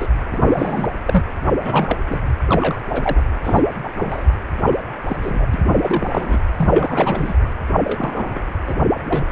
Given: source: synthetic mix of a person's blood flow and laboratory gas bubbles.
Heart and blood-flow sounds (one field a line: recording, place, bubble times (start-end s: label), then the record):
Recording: Doppler ultrasound of blood flow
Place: precordium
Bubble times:
0.00-0.09 s: bubbles
0.32-0.88 s: bubbles
1.05-1.23 s: bubbles
1.47-1.54 s: bubbles
1.58-2.02 s: bubbles
2.10-2.19 s: bubbles
2.47-2.80 s: bubbles
2.91-3.25 s: bubbles
3.44-3.62 s: bubbles
3.83-3.94 s: bubbles
4.00-4.25 s: bubbles
4.66-4.80 s: bubbles
5.08-5.17 s: bubbles
5.21-5.46 s: bubbles
5.54-5.61 s: bubbles
5.75-6.38 s: bubbles
6.57-7.33 s: bubbles
7.84-8.41 s: bubbles
8.68-8.77 s: bubbles
9.05-9.24 s: bubbles
From the record:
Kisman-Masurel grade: 242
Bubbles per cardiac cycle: several, 3 to 8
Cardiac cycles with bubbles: 100%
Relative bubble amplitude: moderate (0.250 to 0.450)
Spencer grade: 3 (all of the cardiac periods contain showers or single bubble signals, but not dominating or overriding the cardiac motion signals)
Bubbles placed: anywhere in the cardiac cycle